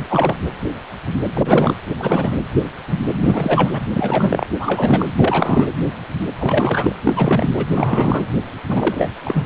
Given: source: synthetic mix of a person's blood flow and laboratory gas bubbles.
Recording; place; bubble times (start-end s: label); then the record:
Doppler ultrasound of blood flow; precordium
0.08-0.35 s: bubbles
1.34-1.73 s: bubbles
1.98-2.35 s: bubbles
3.23-3.70 s: bubbles
3.73-3.80 s: bubbles
3.93-4.47 s: bubbles
4.59-5.13 s: bubbles
5.17-5.70 s: bubbles
6.39-6.96 s: bubbles
7.04-7.53 s: bubbles
7.56-7.66 s: bubbles
7.74-8.26 s: bubbles
8.69-9.10 s: bubbles
9.25-9.45 s: bubbles
From the record:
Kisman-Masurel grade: 333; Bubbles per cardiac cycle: rolling drumbeat, 9 or more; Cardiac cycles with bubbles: 50 to 99%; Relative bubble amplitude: loud (0.450 to 0.775); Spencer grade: 3 (all of the cardiac periods contain showers or single bubble signals, but not dominating or overriding the cardiac motion signals); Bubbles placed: anywhere in the cardiac cycle